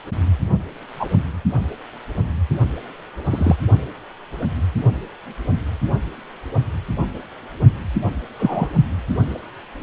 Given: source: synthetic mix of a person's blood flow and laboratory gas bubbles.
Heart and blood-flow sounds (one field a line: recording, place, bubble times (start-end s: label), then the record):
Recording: Doppler ultrasound of blood flow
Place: precordium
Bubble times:
0.99-1.06 s: bubbles
3.24-3.56 s: bubbles
8.38-8.68 s: bubbles
From the record:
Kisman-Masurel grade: 123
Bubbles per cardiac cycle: 1 to 2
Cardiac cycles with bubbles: 10 to 50%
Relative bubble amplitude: loud (0.450 to 0.775)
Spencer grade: 2 (many but less than half of the cardiac periods contain bubble signals, singularly or in groups)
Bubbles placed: only in the low amplitude regions of the cardiac cycle